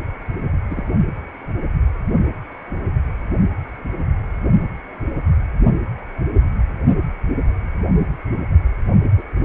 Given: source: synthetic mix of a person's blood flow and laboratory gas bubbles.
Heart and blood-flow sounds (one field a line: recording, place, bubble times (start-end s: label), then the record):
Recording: Doppler ultrasound of blood flow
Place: precordium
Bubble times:
0.69-0.83 s: bubbles
9.18-9.22 s: bubbles
From the record:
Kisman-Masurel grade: 121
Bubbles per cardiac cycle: 1 to 2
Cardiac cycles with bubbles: 10 to 50%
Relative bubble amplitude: barely perceptible (0.100 to 0.250)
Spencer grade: 2 (many but less than half of the cardiac periods contain bubble signals, singularly or in groups)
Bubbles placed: only in the low amplitude regions of the cardiac cycle